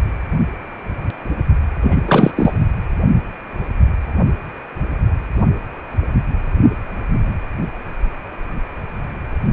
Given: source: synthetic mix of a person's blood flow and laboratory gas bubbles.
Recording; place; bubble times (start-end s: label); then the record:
Doppler ultrasound of blood flow; precordium
1.81-2.02 s: bubbles
2.06-2.31 s: bubbles
2.35-2.52 s: bubbles
From the record:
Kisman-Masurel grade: 213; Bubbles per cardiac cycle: several, 3 to 8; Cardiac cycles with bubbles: 1 to 10%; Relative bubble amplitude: loud (0.450 to 0.775); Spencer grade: 1 (occasional bubble signal discernible with the cardiac motion signal, with majority of cardiac periods free of bubbles); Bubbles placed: only in the low amplitude regions of the cardiac cycle